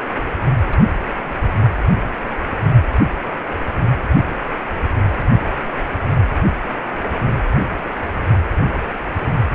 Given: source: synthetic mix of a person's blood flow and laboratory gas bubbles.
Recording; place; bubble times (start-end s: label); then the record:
Doppler ultrasound of blood flow; precordium
0.70-0.80 s: bubbles
8.60-8.79 s: bubbles
8.85-8.91 s: bubbles
From the record:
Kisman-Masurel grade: 121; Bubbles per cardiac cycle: 1 to 2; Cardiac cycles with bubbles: 10 to 50%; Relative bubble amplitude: barely perceptible (0.100 to 0.250); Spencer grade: 2 (many but less than half of the cardiac periods contain bubble signals, singularly or in groups); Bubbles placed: anywhere in the cardiac cycle